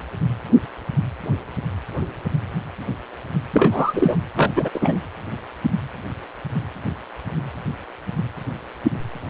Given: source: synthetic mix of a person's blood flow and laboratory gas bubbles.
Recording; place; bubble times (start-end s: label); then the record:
Doppler ultrasound of blood flow; precordium
3.54-4.16 s: bubbles
4.36-4.50 s: bubbles
4.55-4.69 s: bubbles
4.74-4.97 s: bubbles
From the record:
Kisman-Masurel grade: 223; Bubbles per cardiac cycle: several, 3 to 8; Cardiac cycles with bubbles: 10 to 50%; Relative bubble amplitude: loud (0.450 to 0.775); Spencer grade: 2 (many but less than half of the cardiac periods contain bubble signals, singularly or in groups); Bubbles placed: anywhere in the cardiac cycle